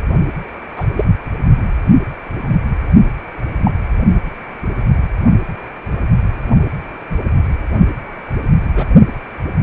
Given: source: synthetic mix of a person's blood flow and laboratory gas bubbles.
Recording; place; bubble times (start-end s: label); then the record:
Doppler ultrasound of blood flow; precordium
0.76-0.84 s: bubbles
0.95-1.05 s: bubbles
3.63-3.71 s: bubbles
8.76-8.86 s: bubbles
From the record:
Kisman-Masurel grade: 123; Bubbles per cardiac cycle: 1 to 2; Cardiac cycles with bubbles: 10 to 50%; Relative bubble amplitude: loud (0.450 to 0.775); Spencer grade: 2 (many but less than half of the cardiac periods contain bubble signals, singularly or in groups); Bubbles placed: only in the low amplitude regions of the cardiac cycle